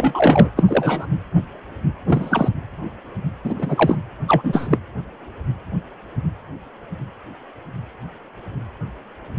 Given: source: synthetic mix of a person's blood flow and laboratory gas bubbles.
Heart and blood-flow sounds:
Doppler ultrasound of blood flow; precordium
0.00-0.49 s: bubbles
0.56-0.64 s: bubbles
0.67-1.06 s: bubbles
2.06-2.48 s: bubbles
3.44-3.54 s: bubbles
3.58-3.98 s: bubbles
4.27-4.79 s: bubbles
From the record:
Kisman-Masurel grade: 223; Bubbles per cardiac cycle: several, 3 to 8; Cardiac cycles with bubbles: 10 to 50%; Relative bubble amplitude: loud (0.450 to 0.775); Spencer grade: 2 (many but less than half of the cardiac periods contain bubble signals, singularly or in groups); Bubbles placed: anywhere in the cardiac cycle

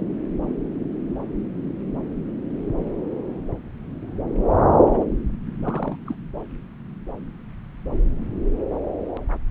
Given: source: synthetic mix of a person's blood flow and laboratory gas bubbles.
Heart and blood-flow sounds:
Doppler ultrasound of blood flow; subclavian vein
4.91-5.05 s: bubbles
5.63-5.96 s: bubbles
6.06-6.14 s: bubbles
From the record:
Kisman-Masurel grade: 221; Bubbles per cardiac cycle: several, 3 to 8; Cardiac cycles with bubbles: 10 to 50%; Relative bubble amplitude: barely perceptible (0.100 to 0.250); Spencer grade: 2 (many but less than half of the cardiac periods contain bubble signals, singularly or in groups); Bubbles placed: anywhere in the cardiac cycle

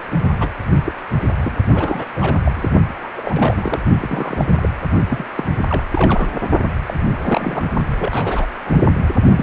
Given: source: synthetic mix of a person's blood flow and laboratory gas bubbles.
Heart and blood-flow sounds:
Doppler ultrasound of blood flow; precordium
0.40-0.50 s: bubbles
0.78-0.81 s: bubbles
0.85-0.92 s: bubbles
1.41-1.53 s: bubbles
1.74-2.06 s: bubbles
2.16-2.37 s: bubbles
2.44-2.52 s: bubbles
2.56-2.69 s: bubbles
2.99-3.10 s: bubbles
3.16-3.79 s: bubbles
3.98-4.69 s: bubbles
5.09-5.24 s: bubbles
5.35-5.44 s: bubbles
5.68-5.83 s: bubbles
5.91-6.28 s: bubbles
6.86-6.94 s: bubbles
7.05-7.14 s: bubbles
7.26-7.64 s: bubbles
7.99-8.47 s: bubbles
8.64-8.81 s: bubbles
9.36-9.43 s: bubbles
From the record:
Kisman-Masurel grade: 242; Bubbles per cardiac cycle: several, 3 to 8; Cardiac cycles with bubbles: 100%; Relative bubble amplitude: moderate (0.250 to 0.450); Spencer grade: 3 (all of the cardiac periods contain showers or single bubble signals, but not dominating or overriding the cardiac motion signals); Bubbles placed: only in the low amplitude regions of the cardiac cycle

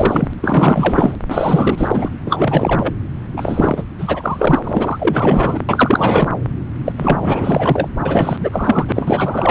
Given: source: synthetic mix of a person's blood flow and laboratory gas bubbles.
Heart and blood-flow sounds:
Doppler ultrasound of blood flow; subclavian vein
0.00-0.33 s: bubbles
0.40-1.16 s: bubbles
1.28-2.10 s: bubbles
2.26-2.94 s: bubbles
3.36-3.83 s: bubbles
3.98-4.59 s: bubbles
4.63-5.61 s: bubbles
5.68-6.29 s: bubbles
6.85-6.92 s: bubbles
6.97-7.19 s: bubbles
7.21-7.88 s: bubbles
8.05-8.37 s: bubbles
8.39-9.51 s: bubbles
From the record:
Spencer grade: 4 (maximum detectable bubble signal sounding continuously throughout systole and diastole of every cardiac period, and overriding the amplitude of the normal cardiac signals); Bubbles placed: anywhere in the cardiac cycle

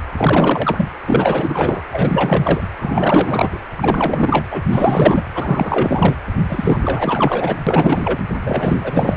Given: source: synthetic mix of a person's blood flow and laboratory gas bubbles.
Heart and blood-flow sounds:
Doppler ultrasound of blood flow; precordium
0.17-0.89 s: bubbles
1.06-1.82 s: bubbles
1.92-2.67 s: bubbles
2.80-3.60 s: bubbles
3.75-4.44 s: bubbles
4.51-4.65 s: bubbles
4.71-5.24 s: bubbles
5.34-6.17 s: bubbles
6.49-7.56 s: bubbles
7.67-8.19 s: bubbles
8.46-9.17 s: bubbles
From the record:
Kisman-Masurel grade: 444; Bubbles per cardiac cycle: continuous sound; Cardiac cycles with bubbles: 100%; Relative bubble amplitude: maximal (0.775 to 0.999); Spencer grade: 4 (maximum detectable bubble signal sounding continuously throughout systole and diastole of every cardiac period, and overriding the amplitude of the normal cardiac signals); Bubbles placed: anywhere in the cardiac cycle

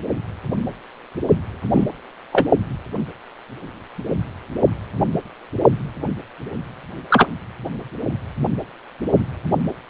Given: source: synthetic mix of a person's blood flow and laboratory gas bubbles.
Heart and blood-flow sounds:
Doppler ultrasound of blood flow; precordium
1.73-1.86 s: bubbles
2.33-2.48 s: bubbles
7.10-7.27 s: bubbles
From the record:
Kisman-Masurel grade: 123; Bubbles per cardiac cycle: 1 to 2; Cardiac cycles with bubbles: 10 to 50%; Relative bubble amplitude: loud (0.450 to 0.775); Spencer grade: 2 (many but less than half of the cardiac periods contain bubble signals, singularly or in groups); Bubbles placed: only in the low amplitude regions of the cardiac cycle

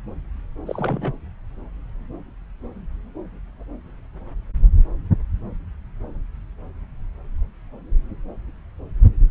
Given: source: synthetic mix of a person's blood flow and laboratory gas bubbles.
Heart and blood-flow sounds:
Doppler ultrasound of blood flow; subclavian vein
0.66-1.15 s: bubbles
From the record:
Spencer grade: 2 (many but less than half of the cardiac periods contain bubble signals, singularly or in groups); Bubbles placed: anywhere in the cardiac cycle

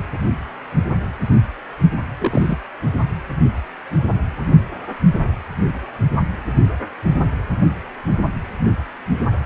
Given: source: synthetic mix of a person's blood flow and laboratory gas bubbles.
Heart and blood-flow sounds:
Doppler ultrasound of blood flow; precordium
2.19-2.58 s: bubbles
From the record:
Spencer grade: 2 (many but less than half of the cardiac periods contain bubble signals, singularly or in groups); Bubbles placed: anywhere in the cardiac cycle

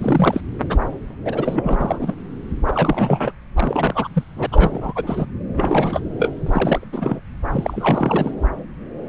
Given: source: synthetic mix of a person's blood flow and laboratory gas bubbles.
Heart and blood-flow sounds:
Doppler ultrasound of blood flow; subclavian vein
0.00-0.40 s: bubbles
0.69-0.79 s: bubbles
1.25-2.14 s: bubbles
2.65-3.32 s: bubbles
3.55-4.08 s: bubbles
4.14-4.23 s: bubbles
4.35-4.46 s: bubbles
4.51-5.25 s: bubbles
5.56-6.00 s: bubbles
6.17-6.31 s: bubbles
6.46-6.87 s: bubbles
6.92-7.20 s: bubbles
7.50-8.31 s: bubbles
From the record:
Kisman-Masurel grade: 332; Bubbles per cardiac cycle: rolling drumbeat, 9 or more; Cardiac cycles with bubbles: 50 to 99%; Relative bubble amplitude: moderate (0.250 to 0.450); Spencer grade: 3 (all of the cardiac periods contain showers or single bubble signals, but not dominating or overriding the cardiac motion signals); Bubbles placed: anywhere in the cardiac cycle

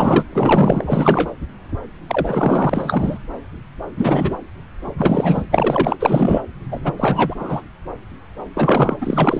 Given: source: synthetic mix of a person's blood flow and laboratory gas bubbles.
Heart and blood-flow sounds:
Doppler ultrasound of blood flow; subclavian vein
0.00-0.25 s: bubbles
0.32-1.31 s: bubbles
2.08-3.18 s: bubbles
3.98-4.37 s: bubbles
4.97-5.42 s: bubbles
5.50-5.96 s: bubbles
6.00-6.42 s: bubbles
6.71-6.79 s: bubbles
6.83-6.93 s: bubbles
6.97-7.35 s: bubbles
7.38-7.62 s: bubbles
8.54-8.96 s: bubbles
9.01-9.40 s: bubbles
From the record:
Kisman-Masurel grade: 333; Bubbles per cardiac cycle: rolling drumbeat, 9 or more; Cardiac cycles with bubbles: 50 to 99%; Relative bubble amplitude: loud (0.450 to 0.775); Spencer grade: 3 (all of the cardiac periods contain showers or single bubble signals, but not dominating or overriding the cardiac motion signals); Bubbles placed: anywhere in the cardiac cycle

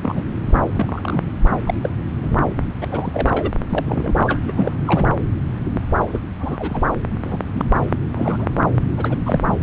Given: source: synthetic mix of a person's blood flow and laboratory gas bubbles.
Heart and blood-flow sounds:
Doppler ultrasound of blood flow; subclavian vein
0.02-0.22 s: bubbles
0.49-0.53 s: bubbles
0.72-1.32 s: bubbles
1.67-1.74 s: bubbles
1.83-1.89 s: bubbles
2.21-2.44 s: bubbles
2.81-2.88 s: bubbles
2.90-3.50 s: bubbles
3.69-4.39 s: bubbles
4.47-4.53 s: bubbles
4.56-4.74 s: bubbles
4.85-5.07 s: bubbles
5.73-5.81 s: bubbles
6.07-6.21 s: bubbles
6.37-6.83 s: bubbles
7.23-7.38 s: bubbles
7.53-7.65 s: bubbles
8.15-8.47 s: bubbles
8.97-9.16 s: bubbles
9.25-9.40 s: bubbles
From the record:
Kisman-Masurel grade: 242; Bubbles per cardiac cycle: several, 3 to 8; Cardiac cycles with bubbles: 100%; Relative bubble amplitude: moderate (0.250 to 0.450); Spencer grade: 3 (all of the cardiac periods contain showers or single bubble signals, but not dominating or overriding the cardiac motion signals); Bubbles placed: anywhere in the cardiac cycle

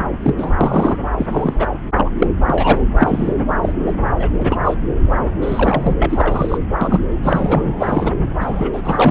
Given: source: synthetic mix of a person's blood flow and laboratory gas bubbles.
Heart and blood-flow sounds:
Doppler ultrasound of blood flow; subclavian vein
0.12-0.18 s: bubbles
0.22-0.34 s: bubbles
0.38-0.51 s: bubbles
0.60-0.97 s: bubbles
1.18-1.71 s: bubbles
1.94-2.10 s: bubbles
2.19-2.27 s: bubbles
2.47-2.87 s: bubbles
2.98-3.34 s: bubbles
3.62-3.74 s: bubbles
3.86-3.92 s: bubbles
4.19-4.29 s: bubbles
4.37-4.57 s: bubbles
4.64-4.75 s: bubbles
5.42-5.95 s: bubbles
5.99-6.58 s: bubbles
6.81-7.00 s: bubbles
7.23-7.74 s: bubbles
7.79-8.12 s: bubbles
8.40-8.81 s: bubbles
8.84-9.11 s: bubbles
From the record:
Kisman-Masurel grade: 243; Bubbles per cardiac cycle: several, 3 to 8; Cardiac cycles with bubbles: 100%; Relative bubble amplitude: loud (0.450 to 0.775); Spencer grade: 3 (all of the cardiac periods contain showers or single bubble signals, but not dominating or overriding the cardiac motion signals); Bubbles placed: anywhere in the cardiac cycle

